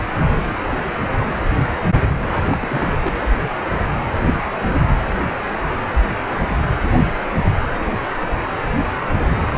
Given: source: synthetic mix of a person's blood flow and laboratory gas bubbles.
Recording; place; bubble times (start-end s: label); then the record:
Doppler ultrasound of blood flow; precordium
2.44-3.15 s: bubbles
From the record:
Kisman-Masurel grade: 211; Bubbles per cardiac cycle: several, 3 to 8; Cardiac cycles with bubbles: 1 to 10%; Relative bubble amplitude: barely perceptible (0.100 to 0.250); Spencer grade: 1 (occasional bubble signal discernible with the cardiac motion signal, with majority of cardiac periods free of bubbles); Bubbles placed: anywhere in the cardiac cycle